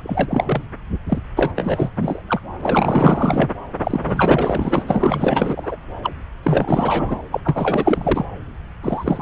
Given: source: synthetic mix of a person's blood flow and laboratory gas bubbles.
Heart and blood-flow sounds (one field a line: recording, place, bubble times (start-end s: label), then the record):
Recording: Doppler ultrasound of blood flow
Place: subclavian vein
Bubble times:
0.00-0.64 s: bubbles
1.08-1.19 s: bubbles
1.37-1.50 s: bubbles
1.56-1.90 s: bubbles
1.96-2.22 s: bubbles
2.27-2.40 s: bubbles
2.58-3.50 s: bubbles
3.80-4.84 s: bubbles
4.87-5.76 s: bubbles
6.02-6.12 s: bubbles
6.43-7.20 s: bubbles
7.32-7.41 s: bubbles
7.44-8.25 s: bubbles
8.83-9.21 s: bubbles
From the record:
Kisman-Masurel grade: 444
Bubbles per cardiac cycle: continuous sound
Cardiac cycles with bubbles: 100%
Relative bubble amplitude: maximal (0.775 to 0.999)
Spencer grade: 4 (maximum detectable bubble signal sounding continuously throughout systole and diastole of every cardiac period, and overriding the amplitude of the normal cardiac signals)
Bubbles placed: anywhere in the cardiac cycle